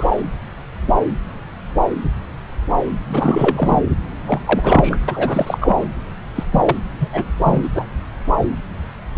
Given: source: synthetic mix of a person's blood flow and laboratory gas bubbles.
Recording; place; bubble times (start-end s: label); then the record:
Doppler ultrasound of blood flow; subclavian vein
0.00-0.08 s: bubbles
3.07-3.82 s: bubbles
4.27-4.39 s: bubbles
4.46-4.98 s: bubbles
5.08-5.58 s: bubbles
5.61-5.87 s: bubbles
6.36-6.44 s: bubbles
6.52-6.75 s: bubbles
7.00-7.08 s: bubbles
7.12-7.25 s: bubbles
7.44-7.69 s: bubbles
7.75-7.86 s: bubbles
From the record:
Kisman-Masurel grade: 333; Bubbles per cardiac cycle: rolling drumbeat, 9 or more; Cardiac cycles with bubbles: 50 to 99%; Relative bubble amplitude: loud (0.450 to 0.775); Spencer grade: 3 (all of the cardiac periods contain showers or single bubble signals, but not dominating or overriding the cardiac motion signals); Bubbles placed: anywhere in the cardiac cycle